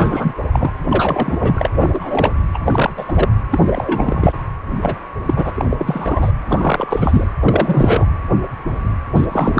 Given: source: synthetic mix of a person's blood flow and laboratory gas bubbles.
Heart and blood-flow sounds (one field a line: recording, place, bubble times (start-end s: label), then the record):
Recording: Doppler ultrasound of blood flow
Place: precordium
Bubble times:
0.00-0.34 s: bubbles
0.52-0.71 s: bubbles
0.89-1.67 s: bubbles
1.72-2.31 s: bubbles
2.54-2.59 s: bubbles
2.64-2.93 s: bubbles
2.97-3.05 s: bubbles
3.08-3.29 s: bubbles
3.50-4.33 s: bubbles
4.82-4.95 s: bubbles
5.25-5.51 s: bubbles
5.54-6.32 s: bubbles
6.48-7.28 s: bubbles
7.40-8.07 s: bubbles
9.15-9.25 s: bubbles
9.31-9.59 s: bubbles
From the record:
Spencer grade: 3 (all of the cardiac periods contain showers or single bubble signals, but not dominating or overriding the cardiac motion signals)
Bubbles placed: anywhere in the cardiac cycle